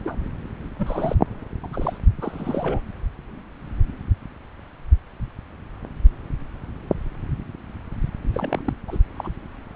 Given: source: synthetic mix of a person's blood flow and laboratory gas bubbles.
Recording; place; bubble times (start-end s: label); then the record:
Doppler ultrasound of blood flow; subclavian vein
0.04-0.21 s: bubbles
0.79-1.15 s: bubbles
1.62-1.98 s: bubbles
2.21-2.81 s: bubbles
8.34-8.62 s: bubbles
8.65-8.73 s: bubbles
8.88-8.98 s: bubbles
9.17-9.28 s: bubbles
From the record:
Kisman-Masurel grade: 221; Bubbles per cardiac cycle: several, 3 to 8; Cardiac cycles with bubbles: 10 to 50%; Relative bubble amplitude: barely perceptible (0.100 to 0.250); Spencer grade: 2 (many but less than half of the cardiac periods contain bubble signals, singularly or in groups); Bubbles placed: anywhere in the cardiac cycle